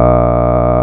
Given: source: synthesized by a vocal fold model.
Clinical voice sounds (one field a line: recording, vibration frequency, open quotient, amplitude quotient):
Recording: sustained vowel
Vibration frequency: 60 Hz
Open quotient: 0.4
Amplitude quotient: 1.1